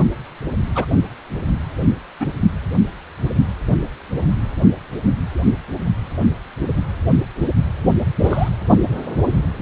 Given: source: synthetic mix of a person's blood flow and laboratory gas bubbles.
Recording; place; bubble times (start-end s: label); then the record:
Doppler ultrasound of blood flow; precordium
0.75-0.85 s: bubbles
2.19-2.27 s: bubbles
8.19-8.49 s: bubbles
From the record:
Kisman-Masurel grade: 122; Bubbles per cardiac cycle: 1 to 2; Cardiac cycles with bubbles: 10 to 50%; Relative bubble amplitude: moderate (0.250 to 0.450); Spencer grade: 2 (many but less than half of the cardiac periods contain bubble signals, singularly or in groups); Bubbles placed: only in the low amplitude regions of the cardiac cycle